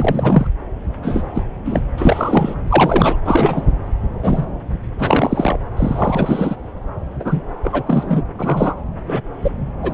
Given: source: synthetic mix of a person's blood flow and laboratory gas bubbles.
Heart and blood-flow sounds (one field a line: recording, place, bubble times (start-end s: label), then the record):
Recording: Doppler ultrasound of blood flow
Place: subclavian vein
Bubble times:
0.00-0.47 s: bubbles
1.02-1.22 s: bubbles
1.34-1.43 s: bubbles
1.65-1.81 s: bubbles
1.97-2.56 s: bubbles
2.67-3.16 s: bubbles
3.25-3.74 s: bubbles
4.23-4.45 s: bubbles
4.98-5.58 s: bubbles
5.77-6.56 s: bubbles
7.19-7.41 s: bubbles
7.64-7.83 s: bubbles
7.87-8.23 s: bubbles
8.38-8.74 s: bubbles
9.04-9.21 s: bubbles
9.42-9.50 s: bubbles
9.82-9.94 s: bubbles
From the record:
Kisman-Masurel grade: 243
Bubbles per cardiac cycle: several, 3 to 8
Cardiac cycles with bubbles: 100%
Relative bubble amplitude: loud (0.450 to 0.775)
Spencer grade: 3 (all of the cardiac periods contain showers or single bubble signals, but not dominating or overriding the cardiac motion signals)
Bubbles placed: anywhere in the cardiac cycle